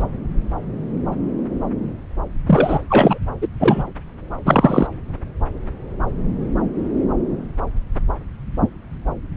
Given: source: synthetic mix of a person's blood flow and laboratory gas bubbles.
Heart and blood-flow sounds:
Doppler ultrasound of blood flow; subclavian vein
0.00-0.04 s: bubbles
2.47-2.79 s: bubbles
2.90-3.18 s: bubbles
3.42-3.47 s: bubbles
3.60-3.83 s: bubbles
4.46-4.87 s: bubbles
From the record:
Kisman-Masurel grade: 223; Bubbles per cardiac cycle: several, 3 to 8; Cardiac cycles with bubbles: 10 to 50%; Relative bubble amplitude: loud (0.450 to 0.775); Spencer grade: 2 (many but less than half of the cardiac periods contain bubble signals, singularly or in groups); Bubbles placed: anywhere in the cardiac cycle

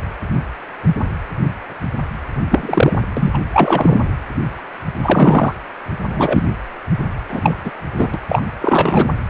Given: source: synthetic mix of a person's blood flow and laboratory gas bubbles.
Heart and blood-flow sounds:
Doppler ultrasound of blood flow; precordium
2.50-2.98 s: bubbles
3.17-3.31 s: bubbles
3.33-3.39 s: bubbles
3.53-3.98 s: bubbles
5.02-5.54 s: bubbles
6.09-6.43 s: bubbles
7.28-7.40 s: bubbles
7.43-7.56 s: bubbles
7.64-7.71 s: bubbles
7.97-8.09 s: bubbles
8.13-8.18 s: bubbles
8.29-8.43 s: bubbles
8.61-9.09 s: bubbles
From the record:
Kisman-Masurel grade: 233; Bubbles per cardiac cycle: several, 3 to 8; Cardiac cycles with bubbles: 50 to 99%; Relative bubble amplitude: loud (0.450 to 0.775); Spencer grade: 3 (all of the cardiac periods contain showers or single bubble signals, but not dominating or overriding the cardiac motion signals); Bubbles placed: anywhere in the cardiac cycle

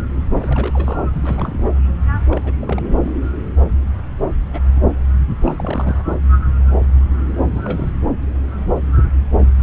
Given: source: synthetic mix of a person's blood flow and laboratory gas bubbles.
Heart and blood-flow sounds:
Doppler ultrasound of blood flow; subclavian vein
0.36-1.01 s: bubbles
1.13-1.69 s: bubbles
2.25-2.40 s: bubbles
2.44-2.53 s: bubbles
2.62-2.81 s: bubbles
3.02-3.11 s: bubbles
4.53-4.60 s: bubbles
4.72-4.82 s: bubbles
5.41-6.02 s: bubbles
7.50-7.92 s: bubbles
From the record:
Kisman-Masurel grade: 221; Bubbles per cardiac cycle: several, 3 to 8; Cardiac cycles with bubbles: 10 to 50%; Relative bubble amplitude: barely perceptible (0.100 to 0.250); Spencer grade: 2 (many but less than half of the cardiac periods contain bubble signals, singularly or in groups); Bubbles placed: anywhere in the cardiac cycle

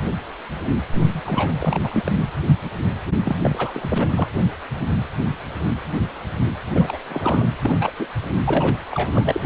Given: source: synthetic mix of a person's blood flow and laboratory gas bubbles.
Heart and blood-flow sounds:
Doppler ultrasound of blood flow; precordium
0.93-1.21 s: bubbles
1.24-2.20 s: bubbles
3.24-3.36 s: bubbles
3.42-3.71 s: bubbles
3.74-4.08 s: bubbles
4.15-4.27 s: bubbles
6.75-6.97 s: bubbles
7.08-7.48 s: bubbles
7.61-7.77 s: bubbles
7.80-7.90 s: bubbles
7.99-8.05 s: bubbles
8.46-8.77 s: bubbles
8.92-9.40 s: bubbles
From the record:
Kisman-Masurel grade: 332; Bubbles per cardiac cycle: rolling drumbeat, 9 or more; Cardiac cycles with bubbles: 50 to 99%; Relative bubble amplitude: moderate (0.250 to 0.450); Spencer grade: 3 (all of the cardiac periods contain showers or single bubble signals, but not dominating or overriding the cardiac motion signals); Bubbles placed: anywhere in the cardiac cycle

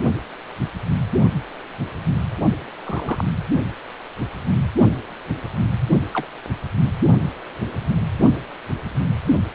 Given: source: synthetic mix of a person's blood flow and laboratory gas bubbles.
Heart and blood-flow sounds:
Doppler ultrasound of blood flow; precordium
2.85-3.24 s: bubbles
6.13-6.27 s: bubbles
From the record:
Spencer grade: 2 (many but less than half of the cardiac periods contain bubble signals, singularly or in groups); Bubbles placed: only in the low amplitude regions of the cardiac cycle

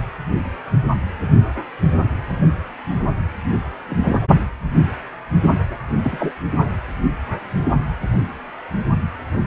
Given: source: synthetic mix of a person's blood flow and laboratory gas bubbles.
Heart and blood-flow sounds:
Doppler ultrasound of blood flow; precordium
3.88-4.22 s: bubbles
6.04-6.33 s: bubbles
From the record:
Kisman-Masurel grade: 122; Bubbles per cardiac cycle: 1 to 2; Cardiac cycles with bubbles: 10 to 50%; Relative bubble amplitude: moderate (0.250 to 0.450); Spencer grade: 2 (many but less than half of the cardiac periods contain bubble signals, singularly or in groups); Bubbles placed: only in the low amplitude regions of the cardiac cycle

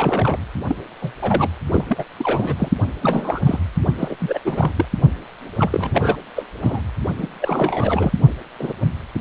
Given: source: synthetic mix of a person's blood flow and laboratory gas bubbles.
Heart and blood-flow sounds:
Doppler ultrasound of blood flow; precordium
0.00-0.37 s: bubbles
0.67-0.75 s: bubbles
1.01-1.12 s: bubbles
1.21-1.50 s: bubbles
1.71-1.84 s: bubbles
1.89-2.05 s: bubbles
2.18-2.69 s: bubbles
3.01-3.40 s: bubbles
3.44-3.60 s: bubbles
3.98-4.15 s: bubbles
4.19-4.39 s: bubbles
4.44-4.72 s: bubbles
4.76-4.85 s: bubbles
5.58-6.17 s: bubbles
6.35-6.46 s: bubbles
6.62-6.81 s: bubbles
7.18-7.26 s: bubbles
7.40-8.11 s: bubbles
8.59-8.72 s: bubbles
From the record:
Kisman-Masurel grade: 342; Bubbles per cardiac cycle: rolling drumbeat, 9 or more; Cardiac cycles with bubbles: 100%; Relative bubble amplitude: moderate (0.250 to 0.450); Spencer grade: 3 (all of the cardiac periods contain showers or single bubble signals, but not dominating or overriding the cardiac motion signals); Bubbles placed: anywhere in the cardiac cycle

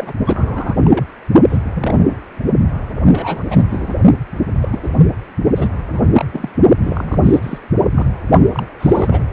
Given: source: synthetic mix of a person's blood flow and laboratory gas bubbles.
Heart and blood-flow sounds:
Doppler ultrasound of blood flow; precordium
0.00-0.14 s: bubbles
0.26-1.04 s: bubbles
1.49-1.59 s: bubbles
1.74-2.05 s: bubbles
2.09-2.17 s: bubbles
3.08-3.96 s: bubbles
4.56-4.90 s: bubbles
5.56-5.70 s: bubbles
5.89-6.00 s: bubbles
6.11-6.25 s: bubbles
6.32-6.49 s: bubbles
6.82-7.58 s: bubbles
7.92-8.06 s: bubbles
8.52-8.65 s: bubbles
8.79-9.24 s: bubbles
From the record:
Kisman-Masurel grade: 242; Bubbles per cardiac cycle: several, 3 to 8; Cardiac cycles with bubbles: 100%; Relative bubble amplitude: moderate (0.250 to 0.450); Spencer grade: 3 (all of the cardiac periods contain showers or single bubble signals, but not dominating or overriding the cardiac motion signals); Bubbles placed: only in the low amplitude regions of the cardiac cycle

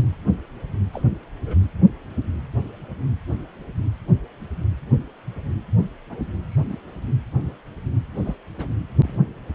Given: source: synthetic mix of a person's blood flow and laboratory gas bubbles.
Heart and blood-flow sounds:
Doppler ultrasound of blood flow; precordium
0.93-1.02 s: bubbles
1.46-1.56 s: bubbles
6.09-6.31 s: bubbles
6.51-6.62 s: bubbles
6.67-6.77 s: bubbles
8.15-8.35 s: bubbles
8.57-8.67 s: bubbles
9.02-9.19 s: bubbles
From the record:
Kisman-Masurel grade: 121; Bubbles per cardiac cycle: 1 to 2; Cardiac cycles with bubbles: 10 to 50%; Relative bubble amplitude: barely perceptible (0.100 to 0.250); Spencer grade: 2 (many but less than half of the cardiac periods contain bubble signals, singularly or in groups); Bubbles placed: anywhere in the cardiac cycle

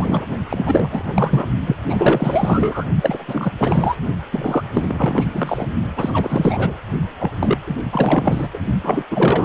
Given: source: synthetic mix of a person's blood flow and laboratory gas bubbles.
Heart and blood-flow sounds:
Doppler ultrasound of blood flow; precordium
0.00-0.24 s: bubbles
0.48-0.90 s: bubbles
0.92-1.48 s: bubbles
1.65-1.77 s: bubbles
1.88-2.85 s: bubbles
3.01-3.51 s: bubbles
3.58-3.96 s: bubbles
4.33-4.63 s: bubbles
4.73-5.27 s: bubbles
5.30-5.69 s: bubbles
5.96-6.73 s: bubbles
7.20-7.31 s: bubbles
7.39-7.58 s: bubbles
7.67-7.75 s: bubbles
7.92-8.48 s: bubbles
8.53-8.61 s: bubbles
8.83-9.03 s: bubbles
9.10-9.44 s: bubbles
From the record:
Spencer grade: 4 (maximum detectable bubble signal sounding continuously throughout systole and diastole of every cardiac period, and overriding the amplitude of the normal cardiac signals); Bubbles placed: only in the low amplitude regions of the cardiac cycle

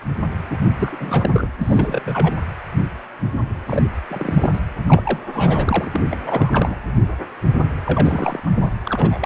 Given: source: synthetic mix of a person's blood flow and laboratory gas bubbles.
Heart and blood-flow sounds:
Doppler ultrasound of blood flow; precordium
0.50-0.56 s: bubbles
0.76-1.48 s: bubbles
1.61-2.33 s: bubbles
3.66-3.82 s: bubbles
4.09-4.60 s: bubbles
4.88-5.19 s: bubbles
5.33-5.90 s: bubbles
5.94-6.03 s: bubbles
6.09-6.77 s: bubbles
7.86-8.40 s: bubbles
8.46-8.51 s: bubbles
8.54-8.72 s: bubbles
8.86-9.26 s: bubbles
From the record:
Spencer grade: 3 (all of the cardiac periods contain showers or single bubble signals, but not dominating or overriding the cardiac motion signals); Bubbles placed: anywhere in the cardiac cycle

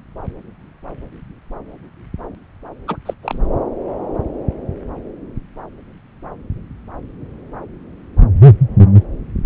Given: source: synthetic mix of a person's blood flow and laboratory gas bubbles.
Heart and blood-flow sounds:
Doppler ultrasound of blood flow; subclavian vein
2.87-2.96 s: bubbles
3.06-3.14 s: bubbles
3.23-3.39 s: bubbles
From the record:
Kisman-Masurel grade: 212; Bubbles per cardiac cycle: several, 3 to 8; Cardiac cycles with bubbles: 1 to 10%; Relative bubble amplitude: moderate (0.250 to 0.450); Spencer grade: 1 (occasional bubble signal discernible with the cardiac motion signal, with majority of cardiac periods free of bubbles); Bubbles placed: anywhere in the cardiac cycle

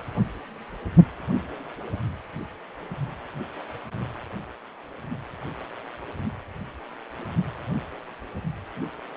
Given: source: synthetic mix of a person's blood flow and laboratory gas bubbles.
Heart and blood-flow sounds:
Doppler ultrasound of blood flow; precordium
no bubbles
From the record:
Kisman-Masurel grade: 000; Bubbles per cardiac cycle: 0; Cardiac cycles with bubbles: 0%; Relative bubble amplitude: no bubbles discernible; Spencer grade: 0 (complete lack of bubble signals)

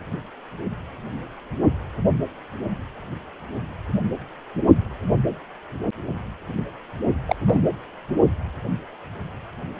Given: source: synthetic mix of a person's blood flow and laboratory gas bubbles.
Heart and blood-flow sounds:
Doppler ultrasound of blood flow; precordium
7.26-7.35 s: bubbles
7.46-7.61 s: bubbles
From the record:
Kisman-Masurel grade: 212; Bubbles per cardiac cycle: several, 3 to 8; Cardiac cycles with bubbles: 1 to 10%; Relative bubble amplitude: moderate (0.250 to 0.450); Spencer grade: 1 (occasional bubble signal discernible with the cardiac motion signal, with majority of cardiac periods free of bubbles); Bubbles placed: only in the low amplitude regions of the cardiac cycle

